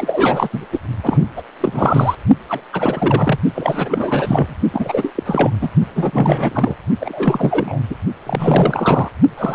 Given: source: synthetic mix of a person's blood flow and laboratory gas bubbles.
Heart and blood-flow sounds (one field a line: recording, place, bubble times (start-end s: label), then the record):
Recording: Doppler ultrasound of blood flow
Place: precordium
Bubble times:
0.00-0.49 s: bubbles
0.53-0.66 s: bubbles
0.72-0.79 s: bubbles
1.03-1.18 s: bubbles
1.36-1.43 s: bubbles
1.60-2.15 s: bubbles
2.48-2.61 s: bubbles
2.73-3.39 s: bubbles
3.55-4.55 s: bubbles
4.72-5.50 s: bubbles
5.61-5.69 s: bubbles
5.94-6.75 s: bubbles
7.00-7.79 s: bubbles
7.90-7.95 s: bubbles
8.25-9.08 s: bubbles
9.38-9.55 s: bubbles
From the record:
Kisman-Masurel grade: 343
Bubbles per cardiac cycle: rolling drumbeat, 9 or more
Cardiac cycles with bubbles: 100%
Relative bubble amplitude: loud (0.450 to 0.775)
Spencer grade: 3 (all of the cardiac periods contain showers or single bubble signals, but not dominating or overriding the cardiac motion signals)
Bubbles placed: only in the low amplitude regions of the cardiac cycle